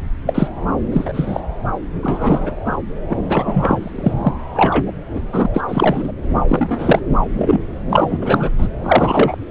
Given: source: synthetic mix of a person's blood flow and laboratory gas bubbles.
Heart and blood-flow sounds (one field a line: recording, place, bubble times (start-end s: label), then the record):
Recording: Doppler ultrasound of blood flow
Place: subclavian vein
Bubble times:
0.27-0.48 s: bubbles
0.92-1.40 s: bubbles
2.02-2.55 s: bubbles
2.65-2.76 s: bubbles
3.09-3.17 s: bubbles
3.28-4.15 s: bubbles
4.22-4.33 s: bubbles
4.53-4.92 s: bubbles
5.15-5.20 s: bubbles
5.33-5.46 s: bubbles
5.54-5.62 s: bubbles
5.68-6.12 s: bubbles
6.48-7.01 s: bubbles
7.37-7.58 s: bubbles
7.89-8.06 s: bubbles
8.09-8.18 s: bubbles
8.21-8.50 s: bubbles
8.58-8.68 s: bubbles
8.84-9.37 s: bubbles
From the record:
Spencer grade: 3 (all of the cardiac periods contain showers or single bubble signals, but not dominating or overriding the cardiac motion signals)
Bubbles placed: anywhere in the cardiac cycle